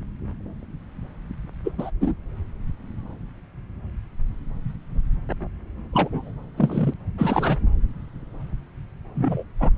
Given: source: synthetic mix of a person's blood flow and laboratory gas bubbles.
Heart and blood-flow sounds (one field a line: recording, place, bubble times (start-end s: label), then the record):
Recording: Doppler ultrasound of blood flow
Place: subclavian vein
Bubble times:
1.65-1.71 s: bubbles
1.78-1.91 s: bubbles
2.00-2.13 s: bubbles
5.93-6.31 s: bubbles
6.56-6.94 s: bubbles
7.18-7.57 s: bubbles
9.14-9.43 s: bubbles
9.60-9.70 s: bubbles
From the record:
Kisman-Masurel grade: 222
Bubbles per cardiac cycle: several, 3 to 8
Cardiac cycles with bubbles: 10 to 50%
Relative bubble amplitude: moderate (0.250 to 0.450)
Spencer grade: 2 (many but less than half of the cardiac periods contain bubble signals, singularly or in groups)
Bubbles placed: anywhere in the cardiac cycle